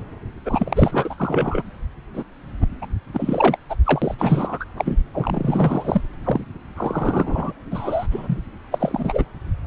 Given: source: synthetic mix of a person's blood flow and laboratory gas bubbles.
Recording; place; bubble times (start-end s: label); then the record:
Doppler ultrasound of blood flow; subclavian vein
0.45-1.15 s: bubbles
1.17-1.62 s: bubbles
2.14-2.23 s: bubbles
2.60-2.67 s: bubbles
2.81-2.86 s: bubbles
3.14-3.56 s: bubbles
3.69-3.75 s: bubbles
3.85-4.15 s: bubbles
4.19-4.65 s: bubbles
4.78-5.00 s: bubbles
5.13-6.01 s: bubbles
6.24-6.44 s: bubbles
6.77-7.53 s: bubbles
7.71-8.07 s: bubbles
8.11-8.38 s: bubbles
8.71-9.23 s: bubbles
From the record:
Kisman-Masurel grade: 342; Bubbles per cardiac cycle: rolling drumbeat, 9 or more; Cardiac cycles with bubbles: 100%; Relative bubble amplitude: moderate (0.250 to 0.450); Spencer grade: 3 (all of the cardiac periods contain showers or single bubble signals, but not dominating or overriding the cardiac motion signals); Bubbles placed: anywhere in the cardiac cycle